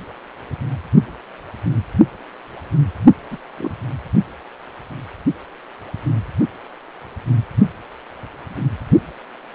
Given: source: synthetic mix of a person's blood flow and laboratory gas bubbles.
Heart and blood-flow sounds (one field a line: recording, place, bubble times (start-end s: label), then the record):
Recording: Doppler ultrasound of blood flow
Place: precordium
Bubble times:
3.30-3.38 s: bubbles
3.57-3.75 s: bubbles
From the record:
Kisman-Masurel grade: 111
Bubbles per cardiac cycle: 1 to 2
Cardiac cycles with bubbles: 1 to 10%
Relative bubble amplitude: barely perceptible (0.100 to 0.250)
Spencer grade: 1 (occasional bubble signal discernible with the cardiac motion signal, with majority of cardiac periods free of bubbles)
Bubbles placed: only in the low amplitude regions of the cardiac cycle